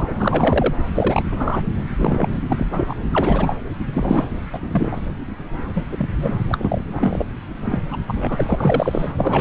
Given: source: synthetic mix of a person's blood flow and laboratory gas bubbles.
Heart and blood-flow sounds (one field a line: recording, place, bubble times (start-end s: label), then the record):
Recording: Doppler ultrasound of blood flow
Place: subclavian vein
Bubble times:
0.00-0.14 s: bubbles
0.18-0.74 s: bubbles
0.94-1.23 s: bubbles
1.31-1.62 s: bubbles
1.77-1.84 s: bubbles
1.97-2.28 s: bubbles
2.50-2.66 s: bubbles
2.71-2.94 s: bubbles
3.11-3.54 s: bubbles
3.93-4.27 s: bubbles
4.53-4.59 s: bubbles
4.71-4.98 s: bubbles
5.75-5.86 s: bubbles
5.92-6.15 s: bubbles
6.19-6.40 s: bubbles
6.51-6.81 s: bubbles
6.88-7.25 s: bubbles
7.65-7.79 s: bubbles
7.91-7.96 s: bubbles
8.07-9.13 s: bubbles
9.18-9.41 s: bubbles
From the record:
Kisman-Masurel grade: 243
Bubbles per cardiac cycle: several, 3 to 8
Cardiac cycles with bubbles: 100%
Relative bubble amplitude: loud (0.450 to 0.775)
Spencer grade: 3 (all of the cardiac periods contain showers or single bubble signals, but not dominating or overriding the cardiac motion signals)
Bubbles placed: anywhere in the cardiac cycle